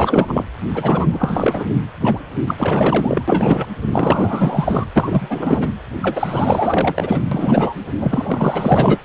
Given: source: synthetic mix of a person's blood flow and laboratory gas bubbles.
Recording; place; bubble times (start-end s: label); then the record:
Doppler ultrasound of blood flow; precordium
0.00-0.44 s: bubbles
0.73-1.65 s: bubbles
2.00-2.18 s: bubbles
2.47-2.55 s: bubbles
2.58-3.23 s: bubbles
3.27-3.66 s: bubbles
3.91-4.86 s: bubbles
4.96-5.70 s: bubbles
6.01-7.21 s: bubbles
7.31-7.75 s: bubbles
7.99-8.99 s: bubbles
From the record:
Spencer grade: 4 (maximum detectable bubble signal sounding continuously throughout systole and diastole of every cardiac period, and overriding the amplitude of the normal cardiac signals); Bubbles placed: anywhere in the cardiac cycle